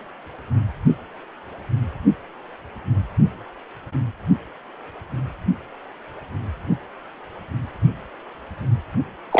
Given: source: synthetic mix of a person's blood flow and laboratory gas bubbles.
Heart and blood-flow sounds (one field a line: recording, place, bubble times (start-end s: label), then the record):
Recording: Doppler ultrasound of blood flow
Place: precordium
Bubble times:
9.31-9.40 s: bubbles
From the record:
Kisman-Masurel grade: 213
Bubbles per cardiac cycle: several, 3 to 8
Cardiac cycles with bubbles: 1 to 10%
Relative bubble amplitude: loud (0.450 to 0.775)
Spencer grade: 1 (occasional bubble signal discernible with the cardiac motion signal, with majority of cardiac periods free of bubbles)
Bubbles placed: only in the low amplitude regions of the cardiac cycle